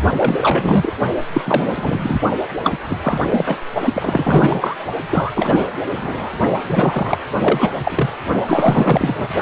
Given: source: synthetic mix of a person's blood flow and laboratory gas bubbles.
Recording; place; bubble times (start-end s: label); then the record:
Doppler ultrasound of blood flow; precordium
0.17-0.92 s: bubbles
1.33-1.41 s: bubbles
1.46-2.20 s: bubbles
2.63-2.77 s: bubbles
2.90-3.60 s: bubbles
3.85-4.76 s: bubbles
5.05-5.69 s: bubbles
5.96-6.30 s: bubbles
6.69-7.18 s: bubbles
7.40-7.70 s: bubbles
7.83-8.10 s: bubbles
8.47-9.30 s: bubbles
From the record:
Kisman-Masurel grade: 343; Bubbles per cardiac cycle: rolling drumbeat, 9 or more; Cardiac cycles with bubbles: 100%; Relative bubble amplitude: loud (0.450 to 0.775); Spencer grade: 3 (all of the cardiac periods contain showers or single bubble signals, but not dominating or overriding the cardiac motion signals); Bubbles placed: only in the low amplitude regions of the cardiac cycle